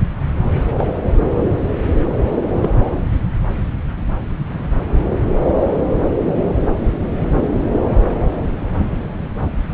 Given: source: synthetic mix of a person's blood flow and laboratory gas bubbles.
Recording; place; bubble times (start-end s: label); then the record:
Doppler ultrasound of blood flow; subclavian vein
0.77-0.86 s: bubbles
1.23-1.44 s: bubbles
2.62-2.70 s: bubbles
From the record:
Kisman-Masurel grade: 112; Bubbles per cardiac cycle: 1 to 2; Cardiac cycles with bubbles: 1 to 10%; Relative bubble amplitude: moderate (0.250 to 0.450); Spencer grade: 1 (occasional bubble signal discernible with the cardiac motion signal, with majority of cardiac periods free of bubbles); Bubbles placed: anywhere in the cardiac cycle